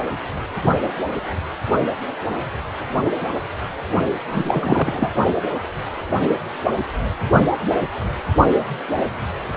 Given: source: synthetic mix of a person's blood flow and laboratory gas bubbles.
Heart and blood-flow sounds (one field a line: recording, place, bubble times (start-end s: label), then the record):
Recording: Doppler ultrasound of blood flow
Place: precordium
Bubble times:
4.30-5.10 s: bubbles
From the record:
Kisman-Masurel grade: 213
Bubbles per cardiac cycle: several, 3 to 8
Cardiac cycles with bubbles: 1 to 10%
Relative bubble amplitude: loud (0.450 to 0.775)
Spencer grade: 1 (occasional bubble signal discernible with the cardiac motion signal, with majority of cardiac periods free of bubbles)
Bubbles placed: only in the low amplitude regions of the cardiac cycle